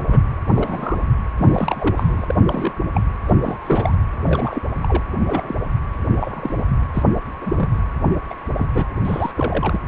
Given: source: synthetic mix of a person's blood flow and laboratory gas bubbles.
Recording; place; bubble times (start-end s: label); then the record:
Doppler ultrasound of blood flow; precordium
0.06-0.24 s: bubbles
0.55-1.08 s: bubbles
1.38-2.34 s: bubbles
2.46-2.74 s: bubbles
2.94-3.01 s: bubbles
3.26-3.36 s: bubbles
3.41-3.57 s: bubbles
3.61-3.95 s: bubbles
4.26-4.62 s: bubbles
4.82-5.03 s: bubbles
5.20-5.56 s: bubbles
6.08-6.65 s: bubbles
6.94-7.03 s: bubbles
7.42-7.53 s: bubbles
7.57-7.70 s: bubbles
8.29-8.34 s: bubbles
8.57-8.66 s: bubbles
8.74-8.85 s: bubbles
9.04-9.31 s: bubbles
9.34-9.78 s: bubbles
From the record:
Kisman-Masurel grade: 242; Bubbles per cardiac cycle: several, 3 to 8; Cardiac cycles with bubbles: 100%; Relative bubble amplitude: moderate (0.250 to 0.450); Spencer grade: 3 (all of the cardiac periods contain showers or single bubble signals, but not dominating or overriding the cardiac motion signals); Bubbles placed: anywhere in the cardiac cycle